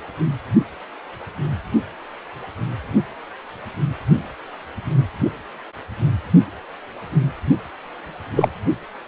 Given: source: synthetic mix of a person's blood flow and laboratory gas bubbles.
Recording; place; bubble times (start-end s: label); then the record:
Doppler ultrasound of blood flow; precordium
8.36-8.49 s: bubbles
From the record:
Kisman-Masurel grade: 123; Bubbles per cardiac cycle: 1 to 2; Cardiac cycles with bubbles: 10 to 50%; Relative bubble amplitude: loud (0.450 to 0.775); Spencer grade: 2 (many but less than half of the cardiac periods contain bubble signals, singularly or in groups); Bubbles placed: only in the low amplitude regions of the cardiac cycle